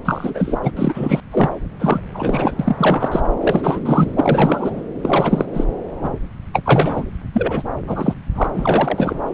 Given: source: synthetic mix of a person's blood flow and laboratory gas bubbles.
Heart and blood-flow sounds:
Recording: Doppler ultrasound of blood flow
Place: subclavian vein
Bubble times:
0.05-0.59 s: bubbles
0.63-0.71 s: bubbles
0.77-1.21 s: bubbles
1.31-1.52 s: bubbles
1.79-2.00 s: bubbles
2.13-2.57 s: bubbles
2.59-3.21 s: bubbles
3.40-3.80 s: bubbles
3.85-4.11 s: bubbles
4.16-4.82 s: bubbles
5.03-5.46 s: bubbles
5.54-5.65 s: bubbles
6.03-6.12 s: bubbles
6.53-6.62 s: bubbles
6.65-7.06 s: bubbles
7.33-7.63 s: bubbles
7.87-8.13 s: bubbles
8.35-8.48 s: bubbles
8.54-9.20 s: bubbles
From the record:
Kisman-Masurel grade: 343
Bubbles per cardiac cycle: rolling drumbeat, 9 or more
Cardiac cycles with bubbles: 100%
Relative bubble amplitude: loud (0.450 to 0.775)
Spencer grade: 3 (all of the cardiac periods contain showers or single bubble signals, but not dominating or overriding the cardiac motion signals)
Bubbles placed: anywhere in the cardiac cycle

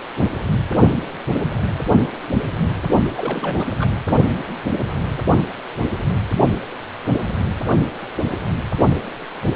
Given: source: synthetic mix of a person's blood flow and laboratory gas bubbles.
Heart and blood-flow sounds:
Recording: Doppler ultrasound of blood flow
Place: precordium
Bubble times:
3.17-3.68 s: bubbles
3.79-3.93 s: bubbles
From the record:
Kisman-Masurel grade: 211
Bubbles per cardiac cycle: several, 3 to 8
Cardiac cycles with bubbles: 1 to 10%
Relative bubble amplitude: barely perceptible (0.100 to 0.250)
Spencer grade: 1 (occasional bubble signal discernible with the cardiac motion signal, with majority of cardiac periods free of bubbles)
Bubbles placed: only in the low amplitude regions of the cardiac cycle

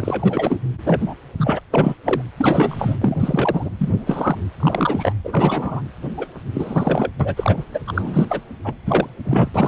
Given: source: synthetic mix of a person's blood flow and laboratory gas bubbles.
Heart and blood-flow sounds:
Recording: Doppler ultrasound of blood flow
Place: precordium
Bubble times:
0.00-0.57 s: bubbles
0.84-1.01 s: bubbles
1.05-1.15 s: bubbles
1.38-1.60 s: bubbles
1.73-1.96 s: bubbles
2.04-2.22 s: bubbles
2.37-2.96 s: bubbles
3.01-3.69 s: bubbles
3.78-4.38 s: bubbles
4.60-5.14 s: bubbles
5.24-5.83 s: bubbles
6.17-6.27 s: bubbles
6.53-7.11 s: bubbles
7.20-7.64 s: bubbles
7.74-7.80 s: bubbles
7.87-8.42 s: bubbles
8.64-8.76 s: bubbles
8.86-9.10 s: bubbles
9.25-9.50 s: bubbles
9.54-9.68 s: bubbles
From the record:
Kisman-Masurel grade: 343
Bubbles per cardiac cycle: rolling drumbeat, 9 or more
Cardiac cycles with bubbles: 100%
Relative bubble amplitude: loud (0.450 to 0.775)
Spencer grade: 3 (all of the cardiac periods contain showers or single bubble signals, but not dominating or overriding the cardiac motion signals)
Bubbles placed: anywhere in the cardiac cycle

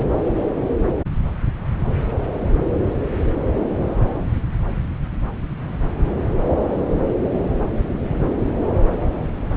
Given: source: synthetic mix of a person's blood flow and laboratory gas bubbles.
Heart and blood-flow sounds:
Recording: Doppler ultrasound of blood flow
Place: subclavian vein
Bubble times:
0.00-0.09 s: bubbles
From the record:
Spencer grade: 1 (occasional bubble signal discernible with the cardiac motion signal, with majority of cardiac periods free of bubbles)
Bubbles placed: anywhere in the cardiac cycle

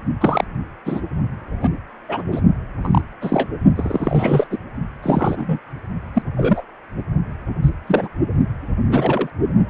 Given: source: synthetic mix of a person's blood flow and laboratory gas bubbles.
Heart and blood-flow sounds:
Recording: Doppler ultrasound of blood flow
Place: precordium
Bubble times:
0.20-0.45 s: bubbles
0.85-1.01 s: bubbles
1.61-1.70 s: bubbles
2.08-2.22 s: bubbles
2.31-2.41 s: bubbles
2.81-3.02 s: bubbles
3.21-3.48 s: bubbles
3.75-4.47 s: bubbles
4.50-4.58 s: bubbles
5.03-5.58 s: bubbles
6.15-6.23 s: bubbles
6.37-6.64 s: bubbles
7.62-7.71 s: bubbles
7.87-8.08 s: bubbles
8.88-9.30 s: bubbles
From the record:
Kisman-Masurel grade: 242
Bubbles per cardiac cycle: several, 3 to 8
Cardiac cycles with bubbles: 100%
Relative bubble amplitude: moderate (0.250 to 0.450)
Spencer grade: 3 (all of the cardiac periods contain showers or single bubble signals, but not dominating or overriding the cardiac motion signals)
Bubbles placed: only in the low amplitude regions of the cardiac cycle

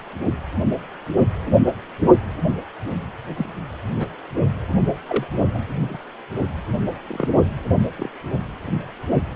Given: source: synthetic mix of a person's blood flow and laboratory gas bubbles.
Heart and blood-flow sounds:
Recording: Doppler ultrasound of blood flow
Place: precordium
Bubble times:
3.37-3.46 s: bubbles
3.99-4.06 s: bubbles
5.08-5.27 s: bubbles
5.54-5.58 s: bubbles
5.83-5.97 s: bubbles
7.08-7.29 s: bubbles
7.97-8.09 s: bubbles
From the record:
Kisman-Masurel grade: 121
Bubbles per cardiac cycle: 1 to 2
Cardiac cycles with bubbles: 10 to 50%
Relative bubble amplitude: barely perceptible (0.100 to 0.250)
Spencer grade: 2 (many but less than half of the cardiac periods contain bubble signals, singularly or in groups)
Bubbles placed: only in the low amplitude regions of the cardiac cycle

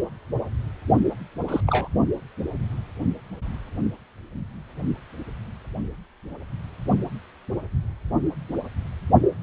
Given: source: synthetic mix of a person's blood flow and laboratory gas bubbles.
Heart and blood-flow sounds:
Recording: Doppler ultrasound of blood flow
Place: precordium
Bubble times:
1.48-1.61 s: bubbles
1.68-1.88 s: bubbles
From the record:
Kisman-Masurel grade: 112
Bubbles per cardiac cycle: 1 to 2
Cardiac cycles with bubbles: 1 to 10%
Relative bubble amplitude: moderate (0.250 to 0.450)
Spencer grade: 1 (occasional bubble signal discernible with the cardiac motion signal, with majority of cardiac periods free of bubbles)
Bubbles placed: only in the low amplitude regions of the cardiac cycle

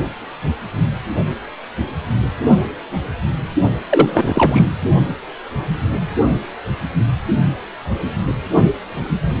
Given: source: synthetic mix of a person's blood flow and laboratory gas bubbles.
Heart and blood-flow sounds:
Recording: Doppler ultrasound of blood flow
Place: precordium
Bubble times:
3.89-4.71 s: bubbles
From the record:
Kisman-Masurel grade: 213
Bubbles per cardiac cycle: several, 3 to 8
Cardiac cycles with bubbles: 1 to 10%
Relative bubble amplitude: loud (0.450 to 0.775)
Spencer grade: 1 (occasional bubble signal discernible with the cardiac motion signal, with majority of cardiac periods free of bubbles)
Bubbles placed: only in the low amplitude regions of the cardiac cycle

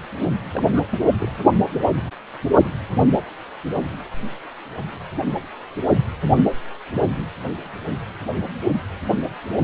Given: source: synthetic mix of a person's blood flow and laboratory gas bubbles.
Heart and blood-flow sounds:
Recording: Doppler ultrasound of blood flow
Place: precordium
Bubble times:
0.53-0.81 s: bubbles
0.91-1.08 s: bubbles
1.20-1.33 s: bubbles
From the record:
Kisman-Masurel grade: 211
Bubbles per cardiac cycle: several, 3 to 8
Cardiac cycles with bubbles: 1 to 10%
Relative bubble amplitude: barely perceptible (0.100 to 0.250)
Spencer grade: 1 (occasional bubble signal discernible with the cardiac motion signal, with majority of cardiac periods free of bubbles)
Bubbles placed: only in the low amplitude regions of the cardiac cycle

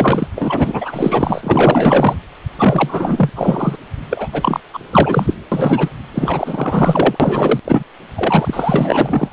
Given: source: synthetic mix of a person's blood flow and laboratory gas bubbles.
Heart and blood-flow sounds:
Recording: Doppler ultrasound of blood flow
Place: precordium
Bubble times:
0.00-0.28 s: bubbles
0.35-2.17 s: bubbles
2.58-3.31 s: bubbles
3.35-3.76 s: bubbles
4.10-4.28 s: bubbles
4.32-4.60 s: bubbles
4.73-4.79 s: bubbles
4.91-5.34 s: bubbles
5.52-5.89 s: bubbles
6.13-7.60 s: bubbles
7.64-7.84 s: bubbles
8.16-9.33 s: bubbles
From the record:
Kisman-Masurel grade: 444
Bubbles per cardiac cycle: continuous sound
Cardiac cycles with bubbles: 100%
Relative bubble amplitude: maximal (0.775 to 0.999)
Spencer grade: 4 (maximum detectable bubble signal sounding continuously throughout systole and diastole of every cardiac period, and overriding the amplitude of the normal cardiac signals)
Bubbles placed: anywhere in the cardiac cycle

